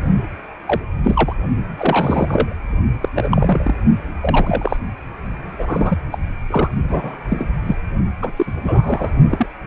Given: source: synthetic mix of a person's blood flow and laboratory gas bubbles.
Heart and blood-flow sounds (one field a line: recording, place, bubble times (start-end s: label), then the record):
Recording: Doppler ultrasound of blood flow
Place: precordium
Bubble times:
0.66-0.80 s: bubbles
1.03-1.35 s: bubbles
1.78-2.56 s: bubbles
3.01-3.08 s: bubbles
3.15-3.74 s: bubbles
4.21-4.76 s: bubbles
5.59-5.97 s: bubbles
6.12-6.18 s: bubbles
6.50-6.69 s: bubbles
6.88-7.17 s: bubbles
7.29-7.46 s: bubbles
7.66-7.76 s: bubbles
8.21-8.31 s: bubbles
8.36-8.52 s: bubbles
8.63-9.14 s: bubbles
9.29-9.46 s: bubbles
From the record:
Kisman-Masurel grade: 243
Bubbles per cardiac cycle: several, 3 to 8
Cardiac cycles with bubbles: 100%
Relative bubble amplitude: loud (0.450 to 0.775)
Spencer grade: 3 (all of the cardiac periods contain showers or single bubble signals, but not dominating or overriding the cardiac motion signals)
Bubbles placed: only in the low amplitude regions of the cardiac cycle